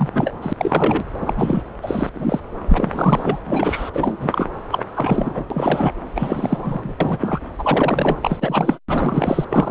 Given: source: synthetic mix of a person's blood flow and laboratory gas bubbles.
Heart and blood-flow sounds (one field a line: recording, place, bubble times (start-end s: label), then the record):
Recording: Doppler ultrasound of blood flow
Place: subclavian vein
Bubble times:
0.00-0.09 s: bubbles
0.14-0.33 s: bubbles
0.42-0.53 s: bubbles
0.57-1.04 s: bubbles
1.20-1.33 s: bubbles
1.36-1.64 s: bubbles
1.81-2.10 s: bubbles
2.15-2.40 s: bubbles
2.69-3.42 s: bubbles
3.46-3.90 s: bubbles
3.93-4.17 s: bubbles
4.20-4.46 s: bubbles
4.71-4.83 s: bubbles
4.95-5.46 s: bubbles
5.50-5.93 s: bubbles
6.15-6.93 s: bubbles
7.00-7.41 s: bubbles
7.58-8.18 s: bubbles
8.22-8.37 s: bubbles
8.40-8.78 s: bubbles
8.88-9.45 s: bubbles
9.49-9.71 s: bubbles
From the record:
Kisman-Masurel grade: 342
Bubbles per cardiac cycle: rolling drumbeat, 9 or more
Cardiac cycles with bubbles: 100%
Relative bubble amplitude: moderate (0.250 to 0.450)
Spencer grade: 3 (all of the cardiac periods contain showers or single bubble signals, but not dominating or overriding the cardiac motion signals)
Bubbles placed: anywhere in the cardiac cycle